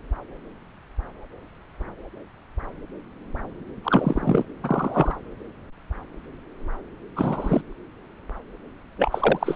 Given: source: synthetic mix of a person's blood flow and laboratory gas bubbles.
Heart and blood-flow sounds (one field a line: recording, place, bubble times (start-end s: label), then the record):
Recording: Doppler ultrasound of blood flow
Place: subclavian vein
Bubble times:
3.84-4.45 s: bubbles
4.63-5.16 s: bubbles
7.16-7.62 s: bubbles
8.97-9.56 s: bubbles
From the record:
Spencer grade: 2 (many but less than half of the cardiac periods contain bubble signals, singularly or in groups)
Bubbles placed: anywhere in the cardiac cycle